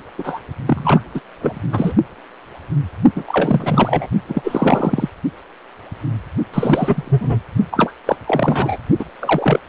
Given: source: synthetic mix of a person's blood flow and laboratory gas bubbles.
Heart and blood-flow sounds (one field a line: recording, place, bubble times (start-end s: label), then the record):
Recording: Doppler ultrasound of blood flow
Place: precordium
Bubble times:
0.18-0.41 s: bubbles
0.67-1.02 s: bubbles
1.15-1.21 s: bubbles
1.39-1.62 s: bubbles
1.72-1.94 s: bubbles
3.16-3.24 s: bubbles
3.27-4.08 s: bubbles
4.28-5.09 s: bubbles
6.54-7.38 s: bubbles
7.71-7.92 s: bubbles
8.06-8.18 s: bubbles
8.27-8.77 s: bubbles
8.99-9.04 s: bubbles
9.19-9.59 s: bubbles
From the record:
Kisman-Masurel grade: 333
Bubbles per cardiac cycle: rolling drumbeat, 9 or more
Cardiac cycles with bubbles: 50 to 99%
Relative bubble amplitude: loud (0.450 to 0.775)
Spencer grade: 3 (all of the cardiac periods contain showers or single bubble signals, but not dominating or overriding the cardiac motion signals)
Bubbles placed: only in the low amplitude regions of the cardiac cycle